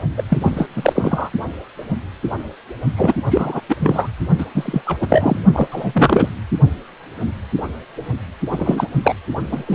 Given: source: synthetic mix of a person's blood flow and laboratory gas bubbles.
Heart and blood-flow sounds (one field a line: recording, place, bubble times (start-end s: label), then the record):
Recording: Doppler ultrasound of blood flow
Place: precordium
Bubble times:
0.17-0.23 s: bubbles
0.29-0.39 s: bubbles
0.41-0.68 s: bubbles
0.76-1.30 s: bubbles
2.96-3.17 s: bubbles
3.31-3.60 s: bubbles
3.69-3.77 s: bubbles
3.79-4.08 s: bubbles
4.38-4.46 s: bubbles
4.54-4.82 s: bubbles
4.86-4.98 s: bubbles
5.01-5.39 s: bubbles
5.53-5.67 s: bubbles
5.71-6.29 s: bubbles
8.51-8.87 s: bubbles
9.03-9.13 s: bubbles
9.47-9.75 s: bubbles
From the record:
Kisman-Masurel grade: 333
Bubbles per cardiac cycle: rolling drumbeat, 9 or more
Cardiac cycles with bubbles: 50 to 99%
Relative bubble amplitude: loud (0.450 to 0.775)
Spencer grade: 3 (all of the cardiac periods contain showers or single bubble signals, but not dominating or overriding the cardiac motion signals)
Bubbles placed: only in the low amplitude regions of the cardiac cycle